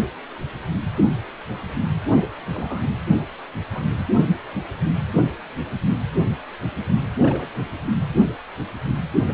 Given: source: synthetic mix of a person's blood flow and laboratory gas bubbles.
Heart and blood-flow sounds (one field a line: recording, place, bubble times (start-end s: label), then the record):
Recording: Doppler ultrasound of blood flow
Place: precordium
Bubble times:
2.16-2.22 s: bubbles
2.54-2.88 s: bubbles
3.17-3.25 s: bubbles
3.74-3.87 s: bubbles
7.21-7.49 s: bubbles
7.54-7.62 s: bubbles
9.29-9.33 s: bubbles
From the record:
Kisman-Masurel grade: 122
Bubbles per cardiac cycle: 1 to 2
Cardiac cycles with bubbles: 10 to 50%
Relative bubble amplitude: moderate (0.250 to 0.450)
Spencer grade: 2 (many but less than half of the cardiac periods contain bubble signals, singularly or in groups)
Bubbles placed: only in the low amplitude regions of the cardiac cycle